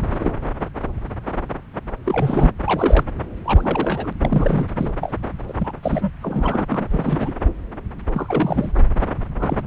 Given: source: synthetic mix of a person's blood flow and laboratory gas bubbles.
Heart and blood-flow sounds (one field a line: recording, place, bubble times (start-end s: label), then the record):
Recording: Doppler ultrasound of blood flow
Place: subclavian vein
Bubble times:
0.11-0.32 s: bubbles
2.04-2.51 s: bubbles
2.65-3.05 s: bubbles
3.45-4.13 s: bubbles
4.20-4.68 s: bubbles
4.77-4.92 s: bubbles
5.01-5.14 s: bubbles
5.48-5.72 s: bubbles
5.83-6.10 s: bubbles
6.22-6.66 s: bubbles
6.69-6.87 s: bubbles
6.91-7.32 s: bubbles
8.14-8.72 s: bubbles
9.39-9.67 s: bubbles
From the record:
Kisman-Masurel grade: 232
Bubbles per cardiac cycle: several, 3 to 8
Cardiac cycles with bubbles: 50 to 99%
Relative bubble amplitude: moderate (0.250 to 0.450)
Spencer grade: 3 (all of the cardiac periods contain showers or single bubble signals, but not dominating or overriding the cardiac motion signals)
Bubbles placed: anywhere in the cardiac cycle